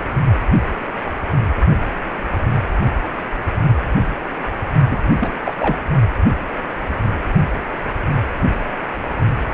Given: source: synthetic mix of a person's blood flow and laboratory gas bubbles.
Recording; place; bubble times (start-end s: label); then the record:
Doppler ultrasound of blood flow; precordium
4.89-4.98 s: bubbles
5.20-5.40 s: bubbles
5.44-5.54 s: bubbles
5.58-5.82 s: bubbles
From the record:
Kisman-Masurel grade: 222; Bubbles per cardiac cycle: several, 3 to 8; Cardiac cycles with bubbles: 10 to 50%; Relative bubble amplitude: moderate (0.250 to 0.450); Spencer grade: 2 (many but less than half of the cardiac periods contain bubble signals, singularly or in groups); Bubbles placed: only in the low amplitude regions of the cardiac cycle